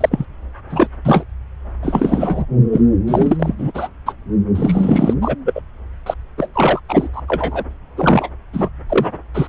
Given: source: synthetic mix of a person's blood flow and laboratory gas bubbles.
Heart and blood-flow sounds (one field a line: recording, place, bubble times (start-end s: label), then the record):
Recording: Doppler ultrasound of blood flow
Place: subclavian vein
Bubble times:
0.00-0.25 s: bubbles
0.70-0.87 s: bubbles
1.04-1.23 s: bubbles
1.82-2.46 s: bubbles
2.72-2.81 s: bubbles
3.07-3.55 s: bubbles
3.58-3.88 s: bubbles
4.06-4.14 s: bubbles
4.55-5.13 s: bubbles
5.21-5.35 s: bubbles
5.45-5.62 s: bubbles
6.06-6.14 s: bubbles
6.38-6.47 s: bubbles
6.54-6.80 s: bubbles
6.88-7.08 s: bubbles
7.13-7.22 s: bubbles
7.28-7.64 s: bubbles
7.97-8.30 s: bubbles
8.53-8.69 s: bubbles
8.88-9.06 s: bubbles
9.34-9.47 s: bubbles
From the record:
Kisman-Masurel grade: 343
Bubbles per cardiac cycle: rolling drumbeat, 9 or more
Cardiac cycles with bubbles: 100%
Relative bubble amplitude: loud (0.450 to 0.775)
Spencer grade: 3 (all of the cardiac periods contain showers or single bubble signals, but not dominating or overriding the cardiac motion signals)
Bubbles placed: anywhere in the cardiac cycle